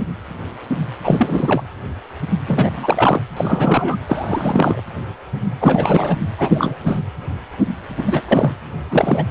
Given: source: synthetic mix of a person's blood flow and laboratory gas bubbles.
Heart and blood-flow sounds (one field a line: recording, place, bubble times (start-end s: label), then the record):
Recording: Doppler ultrasound of blood flow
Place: precordium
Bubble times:
1.04-1.63 s: bubbles
2.47-3.22 s: bubbles
3.37-3.96 s: bubbles
4.07-4.82 s: bubbles
5.60-6.18 s: bubbles
6.37-7.00 s: bubbles
7.97-8.22 s: bubbles
8.28-8.53 s: bubbles
8.90-9.24 s: bubbles
From the record:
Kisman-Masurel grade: 333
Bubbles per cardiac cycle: rolling drumbeat, 9 or more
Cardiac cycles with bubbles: 50 to 99%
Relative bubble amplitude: loud (0.450 to 0.775)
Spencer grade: 3 (all of the cardiac periods contain showers or single bubble signals, but not dominating or overriding the cardiac motion signals)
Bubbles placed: anywhere in the cardiac cycle